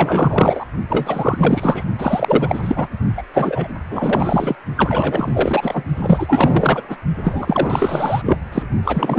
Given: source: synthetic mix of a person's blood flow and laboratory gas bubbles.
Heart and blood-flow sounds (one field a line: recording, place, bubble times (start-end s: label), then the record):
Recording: Doppler ultrasound of blood flow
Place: precordium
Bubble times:
0.00-0.67 s: bubbles
0.89-1.84 s: bubbles
1.98-2.87 s: bubbles
3.17-3.23 s: bubbles
3.33-3.68 s: bubbles
3.90-4.55 s: bubbles
4.77-5.83 s: bubbles
5.96-6.81 s: bubbles
6.89-6.96 s: bubbles
7.23-8.21 s: bubbles
8.25-8.38 s: bubbles
8.53-8.62 s: bubbles
8.83-9.18 s: bubbles
From the record:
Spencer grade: 4 (maximum detectable bubble signal sounding continuously throughout systole and diastole of every cardiac period, and overriding the amplitude of the normal cardiac signals)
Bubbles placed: only in the low amplitude regions of the cardiac cycle